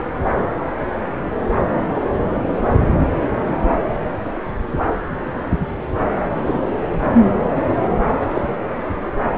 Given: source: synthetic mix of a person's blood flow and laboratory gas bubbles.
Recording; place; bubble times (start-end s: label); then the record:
Doppler ultrasound of blood flow; subclavian vein
6.46-6.60 s: bubbles
7.07-7.12 s: bubbles
8.35-8.41 s: bubbles
From the record:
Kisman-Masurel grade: 122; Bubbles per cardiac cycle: 1 to 2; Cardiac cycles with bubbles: 10 to 50%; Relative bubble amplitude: moderate (0.250 to 0.450); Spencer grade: 2 (many but less than half of the cardiac periods contain bubble signals, singularly or in groups); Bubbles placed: anywhere in the cardiac cycle